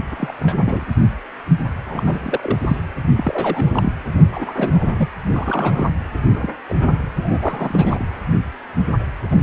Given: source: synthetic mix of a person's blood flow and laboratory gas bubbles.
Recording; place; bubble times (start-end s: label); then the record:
Doppler ultrasound of blood flow; precordium
0.10-0.15 s: bubbles
0.19-0.33 s: bubbles
0.40-0.54 s: bubbles
0.57-0.84 s: bubbles
1.85-2.59 s: bubbles
2.62-2.81 s: bubbles
3.17-3.93 s: bubbles
4.31-4.93 s: bubbles
4.97-5.08 s: bubbles
5.31-5.90 s: bubbles
6.32-6.47 s: bubbles
6.68-6.74 s: bubbles
6.77-6.88 s: bubbles
7.16-7.38 s: bubbles
7.42-8.05 s: bubbles
9.31-9.36 s: bubbles
From the record:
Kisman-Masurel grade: 232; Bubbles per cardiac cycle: several, 3 to 8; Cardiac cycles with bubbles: 50 to 99%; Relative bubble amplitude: moderate (0.250 to 0.450); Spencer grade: 3 (all of the cardiac periods contain showers or single bubble signals, but not dominating or overriding the cardiac motion signals); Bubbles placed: anywhere in the cardiac cycle